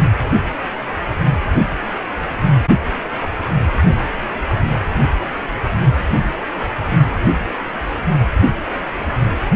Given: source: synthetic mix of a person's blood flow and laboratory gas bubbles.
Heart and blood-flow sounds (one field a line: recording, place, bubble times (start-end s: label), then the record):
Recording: Doppler ultrasound of blood flow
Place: precordium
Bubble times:
no bubbles
From the record:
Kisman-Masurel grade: 000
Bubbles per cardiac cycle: 0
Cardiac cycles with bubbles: 0%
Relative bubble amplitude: no bubbles discernible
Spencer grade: 0 (complete lack of bubble signals)